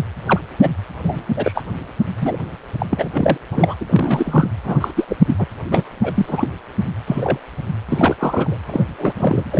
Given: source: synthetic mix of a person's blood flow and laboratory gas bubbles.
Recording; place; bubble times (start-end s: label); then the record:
Doppler ultrasound of blood flow; precordium
0.26-0.39 s: bubbles
0.60-0.71 s: bubbles
1.04-1.22 s: bubbles
1.36-1.62 s: bubbles
2.21-2.36 s: bubbles
2.79-2.86 s: bubbles
2.90-3.10 s: bubbles
3.12-3.38 s: bubbles
3.51-3.74 s: bubbles
3.80-4.50 s: bubbles
4.64-4.91 s: bubbles
4.96-5.05 s: bubbles
5.08-5.16 s: bubbles
5.25-5.34 s: bubbles
5.38-5.46 s: bubbles
5.69-5.84 s: bubbles
6.02-6.50 s: bubbles
7.06-7.39 s: bubbles
7.89-8.58 s: bubbles
8.66-8.84 s: bubbles
8.86-9.14 s: bubbles
9.18-9.44 s: bubbles
9.52-9.60 s: bubbles
From the record:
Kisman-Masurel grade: 243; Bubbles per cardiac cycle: several, 3 to 8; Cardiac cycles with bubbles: 100%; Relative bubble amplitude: loud (0.450 to 0.775); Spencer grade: 3 (all of the cardiac periods contain showers or single bubble signals, but not dominating or overriding the cardiac motion signals); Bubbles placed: anywhere in the cardiac cycle